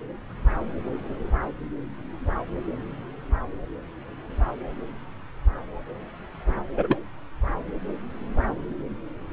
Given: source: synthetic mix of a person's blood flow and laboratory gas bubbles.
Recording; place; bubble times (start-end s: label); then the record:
Doppler ultrasound of blood flow; subclavian vein
6.77-6.98 s: bubbles
From the record:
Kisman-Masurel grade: 112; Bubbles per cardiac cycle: 1 to 2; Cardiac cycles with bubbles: 1 to 10%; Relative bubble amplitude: moderate (0.250 to 0.450); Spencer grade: 1 (occasional bubble signal discernible with the cardiac motion signal, with majority of cardiac periods free of bubbles); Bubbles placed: anywhere in the cardiac cycle